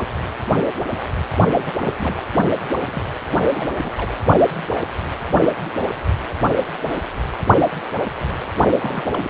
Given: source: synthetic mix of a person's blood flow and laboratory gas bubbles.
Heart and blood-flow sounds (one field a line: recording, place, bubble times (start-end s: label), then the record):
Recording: Doppler ultrasound of blood flow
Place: precordium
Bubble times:
1.53-1.72 s: bubbles
1.78-1.95 s: bubbles
1.98-2.23 s: bubbles
2.84-3.03 s: bubbles
3.51-3.68 s: bubbles
3.83-3.93 s: bubbles
3.97-4.12 s: bubbles
8.80-9.04 s: bubbles
9.10-9.30 s: bubbles
From the record:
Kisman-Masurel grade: 221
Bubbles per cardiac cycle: several, 3 to 8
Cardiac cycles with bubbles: 10 to 50%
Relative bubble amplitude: barely perceptible (0.100 to 0.250)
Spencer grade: 2 (many but less than half of the cardiac periods contain bubble signals, singularly or in groups)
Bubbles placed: only in the low amplitude regions of the cardiac cycle